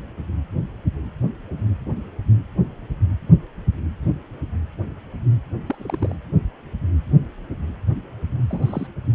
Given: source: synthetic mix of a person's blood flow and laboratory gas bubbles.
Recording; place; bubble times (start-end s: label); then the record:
Doppler ultrasound of blood flow; precordium
5.66-6.16 s: bubbles
8.49-8.87 s: bubbles
From the record:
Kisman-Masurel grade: 121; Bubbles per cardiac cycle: 1 to 2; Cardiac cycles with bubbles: 10 to 50%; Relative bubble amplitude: barely perceptible (0.100 to 0.250); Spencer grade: 2 (many but less than half of the cardiac periods contain bubble signals, singularly or in groups); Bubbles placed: anywhere in the cardiac cycle